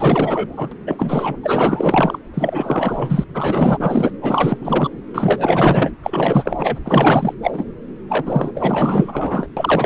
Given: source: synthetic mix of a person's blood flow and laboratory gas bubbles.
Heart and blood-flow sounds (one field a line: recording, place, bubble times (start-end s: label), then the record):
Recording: Doppler ultrasound of blood flow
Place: subclavian vein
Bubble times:
0.00-0.73 s: bubbles
0.86-1.36 s: bubbles
1.43-2.18 s: bubbles
2.34-3.24 s: bubbles
3.34-4.11 s: bubbles
4.21-4.58 s: bubbles
4.61-4.90 s: bubbles
5.13-5.91 s: bubbles
6.03-6.77 s: bubbles
6.84-7.34 s: bubbles
7.42-7.64 s: bubbles
8.09-8.52 s: bubbles
8.54-9.49 s: bubbles
9.56-9.85 s: bubbles
From the record:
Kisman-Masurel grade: 444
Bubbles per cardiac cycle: continuous sound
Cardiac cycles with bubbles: 100%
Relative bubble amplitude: maximal (0.775 to 0.999)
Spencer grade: 4 (maximum detectable bubble signal sounding continuously throughout systole and diastole of every cardiac period, and overriding the amplitude of the normal cardiac signals)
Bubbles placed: anywhere in the cardiac cycle